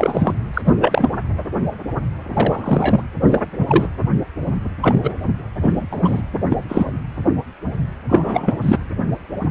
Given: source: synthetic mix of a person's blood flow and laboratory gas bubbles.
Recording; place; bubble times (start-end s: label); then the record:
Doppler ultrasound of blood flow; precordium
0.00-0.34 s: bubbles
0.53-0.61 s: bubbles
0.65-0.74 s: bubbles
0.78-1.08 s: bubbles
2.33-3.03 s: bubbles
3.21-3.42 s: bubbles
3.58-3.88 s: bubbles
4.81-5.17 s: bubbles
5.62-5.87 s: bubbles
5.90-6.22 s: bubbles
6.49-6.65 s: bubbles
6.68-6.92 s: bubbles
8.09-8.56 s: bubbles
8.62-8.79 s: bubbles
From the record:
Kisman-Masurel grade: 233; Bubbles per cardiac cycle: several, 3 to 8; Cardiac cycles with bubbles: 50 to 99%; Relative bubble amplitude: loud (0.450 to 0.775); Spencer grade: 3 (all of the cardiac periods contain showers or single bubble signals, but not dominating or overriding the cardiac motion signals); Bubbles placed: anywhere in the cardiac cycle